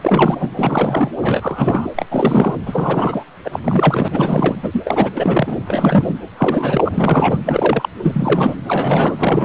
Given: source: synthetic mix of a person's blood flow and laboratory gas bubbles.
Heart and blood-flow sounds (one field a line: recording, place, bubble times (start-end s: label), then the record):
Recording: Doppler ultrasound of blood flow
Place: precordium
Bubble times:
0.02-0.37 s: bubbles
0.40-0.49 s: bubbles
0.57-1.11 s: bubbles
1.21-1.88 s: bubbles
1.96-2.08 s: bubbles
2.11-2.56 s: bubbles
2.66-3.23 s: bubbles
3.44-3.60 s: bubbles
3.63-4.08 s: bubbles
4.11-4.55 s: bubbles
4.62-5.09 s: bubbles
5.16-5.57 s: bubbles
5.65-6.15 s: bubbles
6.37-7.41 s: bubbles
7.46-7.89 s: bubbles
8.02-8.55 s: bubbles
8.67-9.45 s: bubbles
From the record:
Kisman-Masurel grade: 343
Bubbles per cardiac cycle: rolling drumbeat, 9 or more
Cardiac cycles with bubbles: 100%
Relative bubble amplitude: loud (0.450 to 0.775)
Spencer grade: 3 (all of the cardiac periods contain showers or single bubble signals, but not dominating or overriding the cardiac motion signals)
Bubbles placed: anywhere in the cardiac cycle